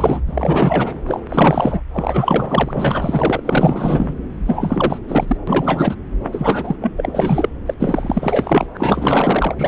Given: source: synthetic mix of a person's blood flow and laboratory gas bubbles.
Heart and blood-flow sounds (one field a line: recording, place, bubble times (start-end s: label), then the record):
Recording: Doppler ultrasound of blood flow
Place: subclavian vein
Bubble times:
0.00-0.21 s: bubbles
0.26-0.98 s: bubbles
1.06-1.20 s: bubbles
1.29-1.82 s: bubbles
1.94-4.15 s: bubbles
4.46-4.99 s: bubbles
5.08-5.37 s: bubbles
5.47-5.96 s: bubbles
6.32-6.76 s: bubbles
6.81-6.93 s: bubbles
6.97-7.49 s: bubbles
7.66-7.74 s: bubbles
7.79-8.67 s: bubbles
8.74-9.55 s: bubbles
9.58-9.68 s: bubbles
From the record:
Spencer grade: 4 (maximum detectable bubble signal sounding continuously throughout systole and diastole of every cardiac period, and overriding the amplitude of the normal cardiac signals)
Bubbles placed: anywhere in the cardiac cycle